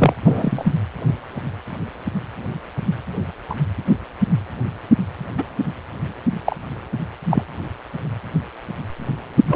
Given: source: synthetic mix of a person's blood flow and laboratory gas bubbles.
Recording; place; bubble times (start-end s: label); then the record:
Doppler ultrasound of blood flow; precordium
0.00-0.14 s: bubbles
0.25-0.71 s: bubbles
3.50-3.54 s: bubbles
5.38-5.44 s: bubbles
6.46-6.56 s: bubbles
7.31-7.44 s: bubbles
9.47-9.56 s: bubbles
From the record:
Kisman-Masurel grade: 123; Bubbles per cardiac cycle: 1 to 2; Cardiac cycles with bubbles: 10 to 50%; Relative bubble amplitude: loud (0.450 to 0.775); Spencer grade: 2 (many but less than half of the cardiac periods contain bubble signals, singularly or in groups); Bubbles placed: anywhere in the cardiac cycle